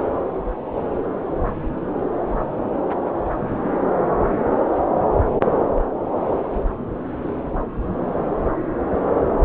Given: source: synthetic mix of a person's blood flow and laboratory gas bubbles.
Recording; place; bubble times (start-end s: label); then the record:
Doppler ultrasound of blood flow; subclavian vein
no bubbles
From the record:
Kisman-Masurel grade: 000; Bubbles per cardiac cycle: 0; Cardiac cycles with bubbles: 0%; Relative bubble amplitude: no bubbles discernible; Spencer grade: 0 (complete lack of bubble signals)